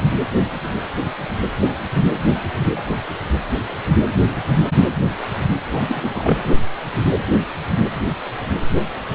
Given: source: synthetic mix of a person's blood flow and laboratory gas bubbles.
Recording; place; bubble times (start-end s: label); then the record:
Doppler ultrasound of blood flow; precordium
5.71-6.39 s: bubbles
From the record:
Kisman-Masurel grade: 212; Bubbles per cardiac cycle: several, 3 to 8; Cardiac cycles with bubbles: 1 to 10%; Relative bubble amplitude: moderate (0.250 to 0.450); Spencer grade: 1 (occasional bubble signal discernible with the cardiac motion signal, with majority of cardiac periods free of bubbles); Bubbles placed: anywhere in the cardiac cycle